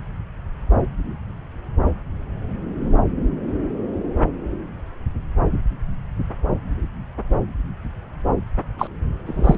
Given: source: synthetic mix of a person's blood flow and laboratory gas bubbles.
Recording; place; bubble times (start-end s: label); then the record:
Doppler ultrasound of blood flow; subclavian vein
8.78-8.87 s: bubbles
9.26-9.55 s: bubbles
From the record:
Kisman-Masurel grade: 213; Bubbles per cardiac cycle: several, 3 to 8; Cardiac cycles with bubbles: 1 to 10%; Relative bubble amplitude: loud (0.450 to 0.775); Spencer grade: 1 (occasional bubble signal discernible with the cardiac motion signal, with majority of cardiac periods free of bubbles); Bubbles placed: anywhere in the cardiac cycle